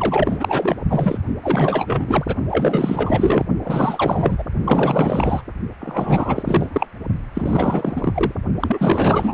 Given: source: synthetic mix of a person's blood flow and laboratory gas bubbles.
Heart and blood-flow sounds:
Doppler ultrasound of blood flow; precordium
0.00-0.82 s: bubbles
0.88-1.18 s: bubbles
1.43-2.35 s: bubbles
2.50-3.46 s: bubbles
3.64-4.44 s: bubbles
4.64-5.42 s: bubbles
5.80-6.87 s: bubbles
7.34-8.32 s: bubbles
8.60-9.34 s: bubbles
From the record:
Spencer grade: 4 (maximum detectable bubble signal sounding continuously throughout systole and diastole of every cardiac period, and overriding the amplitude of the normal cardiac signals); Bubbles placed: only in the low amplitude regions of the cardiac cycle

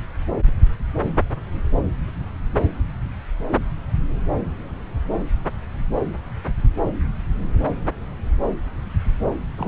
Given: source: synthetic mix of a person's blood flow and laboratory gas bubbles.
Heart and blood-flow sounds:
Doppler ultrasound of blood flow; subclavian vein
9.57-9.68 s: bubbles
From the record:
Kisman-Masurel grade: 212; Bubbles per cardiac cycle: several, 3 to 8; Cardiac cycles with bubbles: 1 to 10%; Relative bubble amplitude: moderate (0.250 to 0.450); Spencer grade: 1 (occasional bubble signal discernible with the cardiac motion signal, with majority of cardiac periods free of bubbles); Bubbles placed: anywhere in the cardiac cycle

